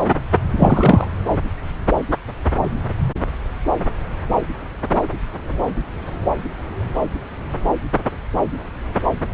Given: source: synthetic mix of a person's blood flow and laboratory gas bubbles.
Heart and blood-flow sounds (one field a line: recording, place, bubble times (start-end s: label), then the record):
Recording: Doppler ultrasound of blood flow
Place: subclavian vein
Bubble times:
0.55-1.06 s: bubbles
From the record:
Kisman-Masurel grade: 213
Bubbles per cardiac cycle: several, 3 to 8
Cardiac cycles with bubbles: 1 to 10%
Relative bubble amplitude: loud (0.450 to 0.775)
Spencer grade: 1 (occasional bubble signal discernible with the cardiac motion signal, with majority of cardiac periods free of bubbles)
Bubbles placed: anywhere in the cardiac cycle